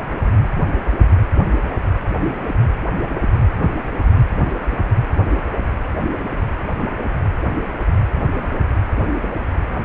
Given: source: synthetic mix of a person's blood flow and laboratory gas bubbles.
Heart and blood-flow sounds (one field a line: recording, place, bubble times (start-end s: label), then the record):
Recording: Doppler ultrasound of blood flow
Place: precordium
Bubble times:
3.59-3.69 s: bubbles
From the record:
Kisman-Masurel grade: 122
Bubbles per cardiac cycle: 1 to 2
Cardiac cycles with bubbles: 10 to 50%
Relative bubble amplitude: moderate (0.250 to 0.450)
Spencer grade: 2 (many but less than half of the cardiac periods contain bubble signals, singularly or in groups)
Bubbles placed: anywhere in the cardiac cycle